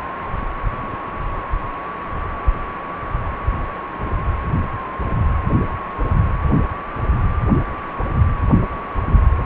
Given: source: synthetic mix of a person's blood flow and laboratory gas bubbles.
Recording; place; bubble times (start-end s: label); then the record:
Doppler ultrasound of blood flow; precordium
0.72-0.89 s: bubbles
From the record:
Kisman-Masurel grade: 111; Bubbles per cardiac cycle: 1 to 2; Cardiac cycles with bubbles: 1 to 10%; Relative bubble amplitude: barely perceptible (0.100 to 0.250); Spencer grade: 1 (occasional bubble signal discernible with the cardiac motion signal, with majority of cardiac periods free of bubbles); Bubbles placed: anywhere in the cardiac cycle